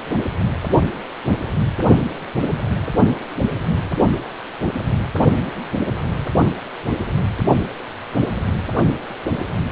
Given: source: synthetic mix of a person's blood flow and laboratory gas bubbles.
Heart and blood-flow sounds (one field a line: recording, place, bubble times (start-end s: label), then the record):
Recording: Doppler ultrasound of blood flow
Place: precordium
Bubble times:
no bubbles
From the record:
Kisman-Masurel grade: 000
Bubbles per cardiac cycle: 0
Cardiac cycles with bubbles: 0%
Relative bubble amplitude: no bubbles discernible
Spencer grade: 0 (complete lack of bubble signals)